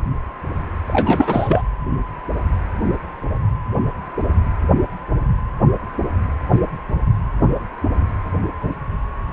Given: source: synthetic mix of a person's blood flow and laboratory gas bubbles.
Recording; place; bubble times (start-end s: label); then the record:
Doppler ultrasound of blood flow; precordium
0.88-1.62 s: bubbles
From the record:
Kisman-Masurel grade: 213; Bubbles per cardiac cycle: several, 3 to 8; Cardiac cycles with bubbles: 1 to 10%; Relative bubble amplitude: loud (0.450 to 0.775); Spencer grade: 1 (occasional bubble signal discernible with the cardiac motion signal, with majority of cardiac periods free of bubbles); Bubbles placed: anywhere in the cardiac cycle